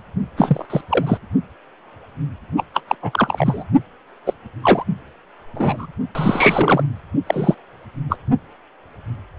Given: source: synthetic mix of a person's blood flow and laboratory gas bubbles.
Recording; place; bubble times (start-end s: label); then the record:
Doppler ultrasound of blood flow; precordium
0.37-0.66 s: bubbles
0.70-0.81 s: bubbles
0.89-1.18 s: bubbles
2.56-2.63 s: bubbles
2.73-2.80 s: bubbles
2.88-2.95 s: bubbles
3.02-3.63 s: bubbles
4.26-4.33 s: bubbles
4.62-4.83 s: bubbles
5.54-5.87 s: bubbles
6.15-6.83 s: bubbles
7.27-7.54 s: bubbles
8.09-8.17 s: bubbles
From the record:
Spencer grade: 3 (all of the cardiac periods contain showers or single bubble signals, but not dominating or overriding the cardiac motion signals); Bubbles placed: only in the low amplitude regions of the cardiac cycle